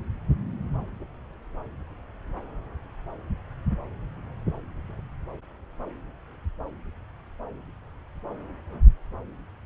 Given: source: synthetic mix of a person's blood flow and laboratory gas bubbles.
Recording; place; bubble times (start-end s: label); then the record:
Doppler ultrasound of blood flow; subclavian vein
no bubbles
From the record:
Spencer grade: 0 (complete lack of bubble signals)